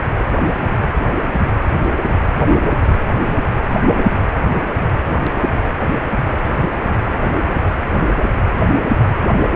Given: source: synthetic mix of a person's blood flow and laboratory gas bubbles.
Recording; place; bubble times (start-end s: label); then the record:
Doppler ultrasound of blood flow; precordium
0.60-0.69 s: bubbles
From the record:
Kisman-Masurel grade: 111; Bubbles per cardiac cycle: 1 to 2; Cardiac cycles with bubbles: 1 to 10%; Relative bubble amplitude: barely perceptible (0.100 to 0.250); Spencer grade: 1 (occasional bubble signal discernible with the cardiac motion signal, with majority of cardiac periods free of bubbles); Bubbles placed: anywhere in the cardiac cycle